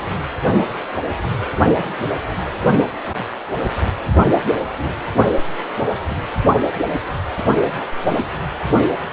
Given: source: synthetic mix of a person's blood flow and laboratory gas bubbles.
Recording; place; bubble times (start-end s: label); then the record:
Doppler ultrasound of blood flow; precordium
4.77-4.96 s: bubbles
From the record:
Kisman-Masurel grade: 111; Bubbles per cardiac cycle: 1 to 2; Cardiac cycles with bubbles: 1 to 10%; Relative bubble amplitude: barely perceptible (0.100 to 0.250); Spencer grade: 1 (occasional bubble signal discernible with the cardiac motion signal, with majority of cardiac periods free of bubbles); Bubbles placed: only in the low amplitude regions of the cardiac cycle